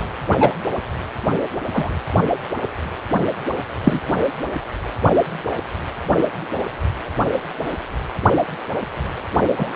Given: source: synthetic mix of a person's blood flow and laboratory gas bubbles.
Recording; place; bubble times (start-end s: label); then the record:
Doppler ultrasound of blood flow; precordium
0.40-0.54 s: bubbles
1.73-1.94 s: bubbles
3.84-4.00 s: bubbles
9.56-9.72 s: bubbles
From the record:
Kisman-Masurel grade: 123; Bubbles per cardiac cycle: 1 to 2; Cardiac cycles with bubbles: 10 to 50%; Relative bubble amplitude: loud (0.450 to 0.775); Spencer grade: 2 (many but less than half of the cardiac periods contain bubble signals, singularly or in groups); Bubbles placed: only in the low amplitude regions of the cardiac cycle